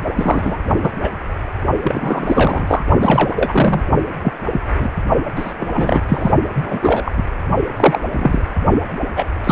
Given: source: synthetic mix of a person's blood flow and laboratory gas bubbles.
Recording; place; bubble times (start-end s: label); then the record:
Doppler ultrasound of blood flow; precordium
0.16-0.58 s: bubbles
0.82-0.91 s: bubbles
0.99-1.10 s: bubbles
1.82-2.83 s: bubbles
3.00-3.83 s: bubbles
4.22-4.33 s: bubbles
4.52-4.63 s: bubbles
4.79-4.89 s: bubbles
5.35-5.54 s: bubbles
5.59-6.02 s: bubbles
6.08-6.32 s: bubbles
6.54-6.78 s: bubbles
6.82-7.12 s: bubbles
7.17-7.23 s: bubbles
7.76-8.01 s: bubbles
8.12-8.42 s: bubbles
9.16-9.25 s: bubbles
9.44-9.52 s: bubbles
From the record:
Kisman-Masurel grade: 243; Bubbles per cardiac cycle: several, 3 to 8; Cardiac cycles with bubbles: 100%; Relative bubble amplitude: loud (0.450 to 0.775); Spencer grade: 3 (all of the cardiac periods contain showers or single bubble signals, but not dominating or overriding the cardiac motion signals); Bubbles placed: only in the low amplitude regions of the cardiac cycle